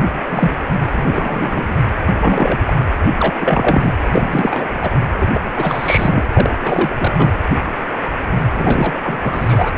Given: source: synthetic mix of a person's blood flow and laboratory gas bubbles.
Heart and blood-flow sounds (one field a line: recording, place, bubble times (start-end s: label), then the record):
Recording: Doppler ultrasound of blood flow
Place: precordium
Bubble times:
0.29-0.51 s: bubbles
0.83-1.75 s: bubbles
2.18-2.58 s: bubbles
2.65-2.81 s: bubbles
3.19-3.35 s: bubbles
3.40-3.93 s: bubbles
4.04-4.68 s: bubbles
4.81-4.91 s: bubbles
5.13-5.28 s: bubbles
5.34-5.41 s: bubbles
5.55-6.29 s: bubbles
6.33-6.51 s: bubbles
6.60-6.96 s: bubbles
7.00-7.31 s: bubbles
8.54-8.99 s: bubbles
9.03-9.71 s: bubbles
From the record:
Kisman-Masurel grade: 333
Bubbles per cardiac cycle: rolling drumbeat, 9 or more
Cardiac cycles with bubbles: 50 to 99%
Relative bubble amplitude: loud (0.450 to 0.775)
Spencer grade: 3 (all of the cardiac periods contain showers or single bubble signals, but not dominating or overriding the cardiac motion signals)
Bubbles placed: anywhere in the cardiac cycle